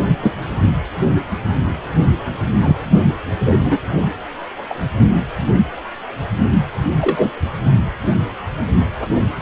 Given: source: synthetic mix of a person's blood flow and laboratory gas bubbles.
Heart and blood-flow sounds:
Doppler ultrasound of blood flow; precordium
0.22-0.34 s: bubbles
2.60-2.76 s: bubbles
3.46-3.57 s: bubbles
3.65-3.78 s: bubbles
4.70-4.75 s: bubbles
6.99-7.30 s: bubbles
From the record:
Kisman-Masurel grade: 123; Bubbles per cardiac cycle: 1 to 2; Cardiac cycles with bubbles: 10 to 50%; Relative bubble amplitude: loud (0.450 to 0.775); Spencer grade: 2 (many but less than half of the cardiac periods contain bubble signals, singularly or in groups); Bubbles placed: only in the low amplitude regions of the cardiac cycle

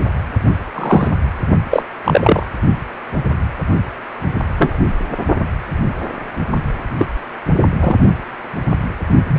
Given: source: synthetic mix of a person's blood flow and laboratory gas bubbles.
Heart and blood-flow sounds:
Doppler ultrasound of blood flow; precordium
0.74-1.08 s: bubbles
1.71-1.82 s: bubbles
2.04-2.46 s: bubbles
4.58-4.77 s: bubbles
6.98-7.08 s: bubbles
7.80-7.96 s: bubbles
9.28-9.38 s: bubbles
From the record:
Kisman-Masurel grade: 123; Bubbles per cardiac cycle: 1 to 2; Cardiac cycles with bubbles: 10 to 50%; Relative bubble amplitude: loud (0.450 to 0.775); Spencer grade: 2 (many but less than half of the cardiac periods contain bubble signals, singularly or in groups); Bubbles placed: only in the low amplitude regions of the cardiac cycle

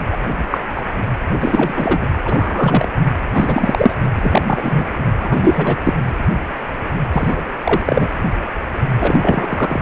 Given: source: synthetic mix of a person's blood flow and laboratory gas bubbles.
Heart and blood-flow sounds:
Doppler ultrasound of blood flow; precordium
0.11-0.17 s: bubbles
0.51-0.60 s: bubbles
0.75-0.82 s: bubbles
1.40-2.08 s: bubbles
2.23-2.88 s: bubbles
3.33-3.94 s: bubbles
4.14-4.42 s: bubbles
4.46-4.85 s: bubbles
5.19-5.78 s: bubbles
5.83-5.93 s: bubbles
7.12-7.42 s: bubbles
7.61-8.09 s: bubbles
8.98-9.81 s: bubbles
From the record:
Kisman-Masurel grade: 233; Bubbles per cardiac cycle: several, 3 to 8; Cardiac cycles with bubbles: 50 to 99%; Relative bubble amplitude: loud (0.450 to 0.775); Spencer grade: 3 (all of the cardiac periods contain showers or single bubble signals, but not dominating or overriding the cardiac motion signals); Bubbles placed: anywhere in the cardiac cycle

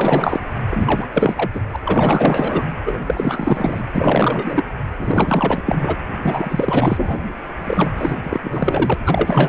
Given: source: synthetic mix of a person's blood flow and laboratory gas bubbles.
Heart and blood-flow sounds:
Doppler ultrasound of blood flow; precordium
0.00-0.39 s: bubbles
0.68-1.06 s: bubbles
1.13-1.61 s: bubbles
1.73-1.76 s: bubbles
1.84-2.65 s: bubbles
2.85-2.99 s: bubbles
3.06-3.85 s: bubbles
3.94-4.64 s: bubbles
4.98-5.62 s: bubbles
5.66-5.96 s: bubbles
6.21-7.19 s: bubbles
7.62-8.95 s: bubbles
9.06-9.49 s: bubbles
From the record:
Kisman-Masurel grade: 444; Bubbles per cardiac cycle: continuous sound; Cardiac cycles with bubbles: 100%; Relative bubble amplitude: maximal (0.775 to 0.999); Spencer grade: 4 (maximum detectable bubble signal sounding continuously throughout systole and diastole of every cardiac period, and overriding the amplitude of the normal cardiac signals); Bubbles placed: anywhere in the cardiac cycle

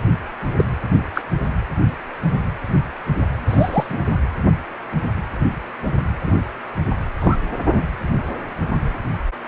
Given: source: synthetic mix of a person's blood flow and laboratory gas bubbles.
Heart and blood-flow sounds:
Doppler ultrasound of blood flow; precordium
0.00-0.02 s: bubbles
0.55-0.65 s: bubbles
1.14-1.23 s: bubbles
3.47-3.87 s: bubbles
3.89-3.97 s: bubbles
6.26-6.32 s: bubbles
7.20-7.37 s: bubbles
7.73-7.89 s: bubbles
From the record:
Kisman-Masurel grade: 122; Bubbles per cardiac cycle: 1 to 2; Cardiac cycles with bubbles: 10 to 50%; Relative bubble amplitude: moderate (0.250 to 0.450); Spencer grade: 2 (many but less than half of the cardiac periods contain bubble signals, singularly or in groups); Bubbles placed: anywhere in the cardiac cycle

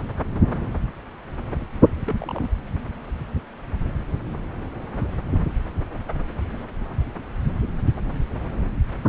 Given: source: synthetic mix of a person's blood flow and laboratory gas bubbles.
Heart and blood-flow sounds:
Doppler ultrasound of blood flow; subclavian vein
2.07-2.49 s: bubbles
From the record:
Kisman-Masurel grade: 111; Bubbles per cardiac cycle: 1 to 2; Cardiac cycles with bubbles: 1 to 10%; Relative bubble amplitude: barely perceptible (0.100 to 0.250); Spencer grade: 1 (occasional bubble signal discernible with the cardiac motion signal, with majority of cardiac periods free of bubbles); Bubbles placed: anywhere in the cardiac cycle

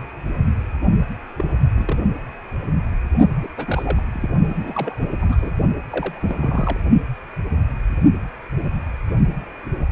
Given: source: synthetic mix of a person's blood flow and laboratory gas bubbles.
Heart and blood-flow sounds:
Doppler ultrasound of blood flow; precordium
1.39-1.99 s: bubbles
3.42-3.49 s: bubbles
3.57-4.02 s: bubbles
4.14-4.28 s: bubbles
4.49-4.95 s: bubbles
5.00-5.05 s: bubbles
5.22-5.36 s: bubbles
5.39-5.51 s: bubbles
5.92-6.77 s: bubbles
From the record:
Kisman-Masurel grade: 221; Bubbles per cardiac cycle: several, 3 to 8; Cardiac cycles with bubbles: 10 to 50%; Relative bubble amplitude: barely perceptible (0.100 to 0.250); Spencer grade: 2 (many but less than half of the cardiac periods contain bubble signals, singularly or in groups); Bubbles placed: only in the low amplitude regions of the cardiac cycle

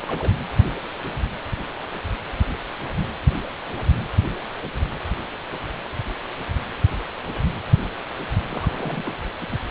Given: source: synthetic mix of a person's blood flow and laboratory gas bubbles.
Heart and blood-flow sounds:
Doppler ultrasound of blood flow; precordium
0.05-0.33 s: bubbles
8.49-9.17 s: bubbles
9.40-9.46 s: bubbles
9.51-9.58 s: bubbles
From the record:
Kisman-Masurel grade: 221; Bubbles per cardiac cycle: several, 3 to 8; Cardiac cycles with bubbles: 10 to 50%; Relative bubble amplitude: barely perceptible (0.100 to 0.250); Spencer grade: 2 (many but less than half of the cardiac periods contain bubble signals, singularly or in groups); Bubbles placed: anywhere in the cardiac cycle

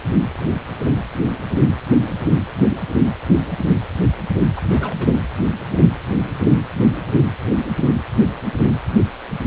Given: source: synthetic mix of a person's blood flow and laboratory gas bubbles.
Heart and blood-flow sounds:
Doppler ultrasound of blood flow; precordium
4.55-5.17 s: bubbles
From the record:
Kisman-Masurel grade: 211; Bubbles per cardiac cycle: several, 3 to 8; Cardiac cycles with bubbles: 1 to 10%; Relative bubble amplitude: barely perceptible (0.100 to 0.250); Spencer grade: 1 (occasional bubble signal discernible with the cardiac motion signal, with majority of cardiac periods free of bubbles); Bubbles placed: anywhere in the cardiac cycle

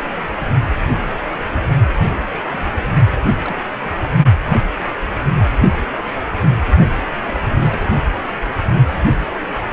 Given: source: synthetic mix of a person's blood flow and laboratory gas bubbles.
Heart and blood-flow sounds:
Doppler ultrasound of blood flow; precordium
1.97-2.18 s: bubbles
2.29-2.33 s: bubbles
2.43-2.72 s: bubbles
3.17-3.56 s: bubbles
3.83-4.08 s: bubbles
7.20-7.91 s: bubbles
From the record:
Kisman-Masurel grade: 221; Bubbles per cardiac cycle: several, 3 to 8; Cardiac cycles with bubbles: 10 to 50%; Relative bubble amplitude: barely perceptible (0.100 to 0.250); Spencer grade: 2 (many but less than half of the cardiac periods contain bubble signals, singularly or in groups); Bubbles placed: only in the low amplitude regions of the cardiac cycle

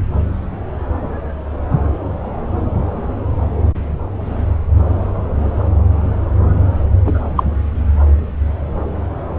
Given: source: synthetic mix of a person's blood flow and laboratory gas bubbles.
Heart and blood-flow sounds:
Doppler ultrasound of blood flow; subclavian vein
7.04-7.21 s: bubbles
7.36-7.44 s: bubbles
From the record:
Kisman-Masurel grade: 113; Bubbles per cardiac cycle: 1 to 2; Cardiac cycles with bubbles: 1 to 10%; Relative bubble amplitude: loud (0.450 to 0.775); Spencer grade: 1 (occasional bubble signal discernible with the cardiac motion signal, with majority of cardiac periods free of bubbles); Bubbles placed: anywhere in the cardiac cycle

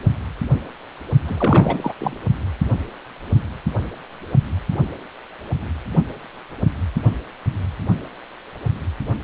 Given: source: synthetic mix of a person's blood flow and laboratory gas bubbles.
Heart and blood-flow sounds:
Doppler ultrasound of blood flow; precordium
1.25-1.93 s: bubbles
1.99-2.16 s: bubbles
From the record:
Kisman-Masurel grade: 212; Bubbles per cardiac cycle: several, 3 to 8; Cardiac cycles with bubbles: 1 to 10%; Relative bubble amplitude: moderate (0.250 to 0.450); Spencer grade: 1 (occasional bubble signal discernible with the cardiac motion signal, with majority of cardiac periods free of bubbles); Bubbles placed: only in the low amplitude regions of the cardiac cycle

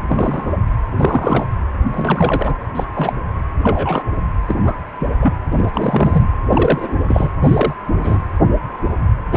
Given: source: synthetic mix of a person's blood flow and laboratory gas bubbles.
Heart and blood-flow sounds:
Doppler ultrasound of blood flow; precordium
0.07-0.53 s: bubbles
0.97-1.48 s: bubbles
1.91-2.54 s: bubbles
2.75-2.85 s: bubbles
2.94-3.13 s: bubbles
3.62-4.06 s: bubbles
4.47-4.54 s: bubbles
4.65-4.75 s: bubbles
4.99-5.12 s: bubbles
5.21-5.34 s: bubbles
5.51-6.28 s: bubbles
6.50-6.94 s: bubbles
7.08-7.30 s: bubbles
7.40-7.73 s: bubbles
7.97-8.18 s: bubbles
9.31-9.37 s: bubbles
From the record:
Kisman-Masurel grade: 232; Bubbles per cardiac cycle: several, 3 to 8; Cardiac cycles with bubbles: 50 to 99%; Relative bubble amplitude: moderate (0.250 to 0.450); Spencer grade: 3 (all of the cardiac periods contain showers or single bubble signals, but not dominating or overriding the cardiac motion signals); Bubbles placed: anywhere in the cardiac cycle

